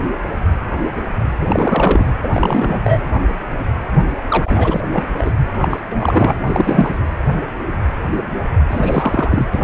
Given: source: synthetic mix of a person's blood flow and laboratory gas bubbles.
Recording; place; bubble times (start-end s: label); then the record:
Doppler ultrasound of blood flow; precordium
1.40-2.06 s: bubbles
2.23-2.81 s: bubbles
2.84-3.01 s: bubbles
4.29-4.84 s: bubbles
4.92-5.04 s: bubbles
5.18-5.33 s: bubbles
5.61-5.80 s: bubbles
5.88-6.37 s: bubbles
6.47-6.99 s: bubbles
8.69-9.46 s: bubbles
9.52-9.64 s: bubbles
From the record:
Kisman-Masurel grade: 333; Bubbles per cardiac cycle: rolling drumbeat, 9 or more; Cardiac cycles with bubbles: 50 to 99%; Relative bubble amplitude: loud (0.450 to 0.775); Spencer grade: 3 (all of the cardiac periods contain showers or single bubble signals, but not dominating or overriding the cardiac motion signals); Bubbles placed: anywhere in the cardiac cycle